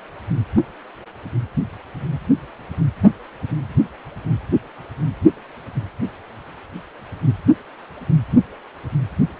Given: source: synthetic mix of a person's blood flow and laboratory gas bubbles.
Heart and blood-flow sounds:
Doppler ultrasound of blood flow; precordium
no bubbles
From the record:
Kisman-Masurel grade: 000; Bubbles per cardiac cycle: 0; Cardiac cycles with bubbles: 0%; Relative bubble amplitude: no bubbles discernible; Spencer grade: 0 (complete lack of bubble signals)

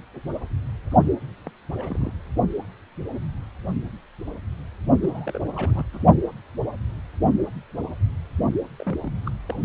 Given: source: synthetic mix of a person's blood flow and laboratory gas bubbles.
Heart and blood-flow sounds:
Doppler ultrasound of blood flow; precordium
1.45-1.50 s: bubbles
1.77-2.12 s: bubbles
5.00-5.39 s: bubbles
5.44-5.48 s: bubbles
5.55-5.84 s: bubbles
5.92-6.03 s: bubbles
8.79-9.00 s: bubbles
9.04-9.11 s: bubbles
9.26-9.31 s: bubbles
9.47-9.56 s: bubbles
From the record:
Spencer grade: 2 (many but less than half of the cardiac periods contain bubble signals, singularly or in groups); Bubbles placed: only in the low amplitude regions of the cardiac cycle

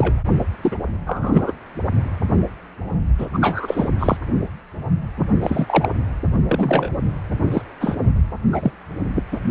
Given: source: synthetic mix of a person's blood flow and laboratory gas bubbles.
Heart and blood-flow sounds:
Doppler ultrasound of blood flow; precordium
0.00-0.22 s: bubbles
0.62-0.76 s: bubbles
1.06-1.52 s: bubbles
3.18-3.26 s: bubbles
3.32-3.88 s: bubbles
3.99-4.17 s: bubbles
5.42-5.89 s: bubbles
6.49-6.90 s: bubbles
7.52-7.62 s: bubbles
7.80-7.96 s: bubbles
8.51-8.71 s: bubbles
9.32-9.41 s: bubbles
From the record:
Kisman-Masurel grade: 233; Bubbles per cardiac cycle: several, 3 to 8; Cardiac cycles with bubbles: 50 to 99%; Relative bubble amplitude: loud (0.450 to 0.775); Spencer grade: 3 (all of the cardiac periods contain showers or single bubble signals, but not dominating or overriding the cardiac motion signals); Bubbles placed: only in the low amplitude regions of the cardiac cycle

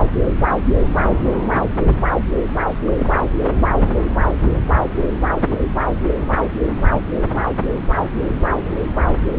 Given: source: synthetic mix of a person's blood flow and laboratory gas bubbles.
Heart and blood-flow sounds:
Doppler ultrasound of blood flow; subclavian vein
2.86-3.23 s: bubbles
From the record:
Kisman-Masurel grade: 112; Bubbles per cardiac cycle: 1 to 2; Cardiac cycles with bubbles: 1 to 10%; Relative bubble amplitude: moderate (0.250 to 0.450); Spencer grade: 1 (occasional bubble signal discernible with the cardiac motion signal, with majority of cardiac periods free of bubbles); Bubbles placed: anywhere in the cardiac cycle

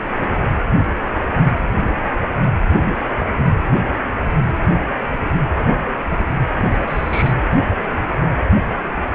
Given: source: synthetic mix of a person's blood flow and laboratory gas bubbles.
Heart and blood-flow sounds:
Doppler ultrasound of blood flow; precordium
6.58-7.33 s: bubbles
From the record:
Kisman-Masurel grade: 221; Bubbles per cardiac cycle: several, 3 to 8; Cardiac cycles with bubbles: 10 to 50%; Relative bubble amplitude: barely perceptible (0.100 to 0.250); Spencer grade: 2 (many but less than half of the cardiac periods contain bubble signals, singularly or in groups); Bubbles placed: anywhere in the cardiac cycle

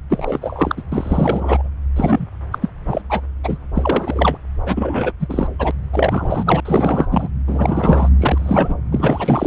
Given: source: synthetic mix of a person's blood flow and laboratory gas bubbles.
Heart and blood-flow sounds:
Doppler ultrasound of blood flow; subclavian vein
0.10-0.82 s: bubbles
0.92-1.69 s: bubbles
1.96-2.26 s: bubbles
2.51-2.58 s: bubbles
2.61-2.69 s: bubbles
2.87-3.01 s: bubbles
3.09-3.21 s: bubbles
3.44-3.57 s: bubbles
3.74-4.38 s: bubbles
4.66-5.12 s: bubbles
5.20-5.48 s: bubbles
5.58-5.71 s: bubbles
5.93-6.61 s: bubbles
6.65-7.29 s: bubbles
7.46-8.08 s: bubbles
8.20-8.75 s: bubbles
8.91-9.47 s: bubbles
From the record:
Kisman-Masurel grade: 343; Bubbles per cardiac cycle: rolling drumbeat, 9 or more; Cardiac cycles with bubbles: 100%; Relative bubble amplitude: loud (0.450 to 0.775); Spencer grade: 3 (all of the cardiac periods contain showers or single bubble signals, but not dominating or overriding the cardiac motion signals); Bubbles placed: anywhere in the cardiac cycle

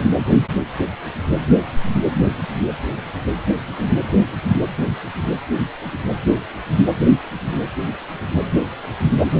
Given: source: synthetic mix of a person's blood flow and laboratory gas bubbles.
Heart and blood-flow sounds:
Doppler ultrasound of blood flow; precordium
no bubbles
From the record:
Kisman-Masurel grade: 000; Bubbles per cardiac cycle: 0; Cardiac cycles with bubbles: 0%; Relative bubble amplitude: no bubbles discernible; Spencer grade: 0 (complete lack of bubble signals)

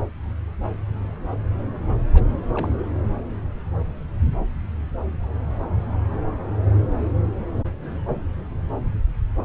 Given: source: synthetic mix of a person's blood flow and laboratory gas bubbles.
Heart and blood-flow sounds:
Doppler ultrasound of blood flow; subclavian vein
2.13-2.23 s: bubbles
2.54-2.71 s: bubbles
2.79-2.84 s: bubbles
From the record:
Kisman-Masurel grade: 211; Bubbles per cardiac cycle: several, 3 to 8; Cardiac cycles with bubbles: 1 to 10%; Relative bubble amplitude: barely perceptible (0.100 to 0.250); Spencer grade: 1 (occasional bubble signal discernible with the cardiac motion signal, with majority of cardiac periods free of bubbles); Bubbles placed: anywhere in the cardiac cycle

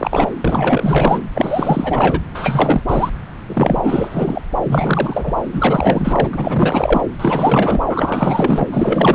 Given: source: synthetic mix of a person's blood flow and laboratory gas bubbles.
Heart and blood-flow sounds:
Doppler ultrasound of blood flow; subclavian vein
0.00-0.30 s: bubbles
0.40-1.23 s: bubbles
1.34-2.22 s: bubbles
2.34-2.81 s: bubbles
2.89-3.10 s: bubbles
3.46-4.42 s: bubbles
4.63-5.33 s: bubbles
5.52-6.30 s: bubbles
6.33-7.02 s: bubbles
7.19-7.80 s: bubbles
7.89-8.67 s: bubbles
8.71-9.15 s: bubbles
From the record:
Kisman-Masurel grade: 444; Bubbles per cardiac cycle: continuous sound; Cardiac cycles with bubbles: 100%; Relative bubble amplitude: maximal (0.775 to 0.999); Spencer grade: 4 (maximum detectable bubble signal sounding continuously throughout systole and diastole of every cardiac period, and overriding the amplitude of the normal cardiac signals); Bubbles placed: anywhere in the cardiac cycle

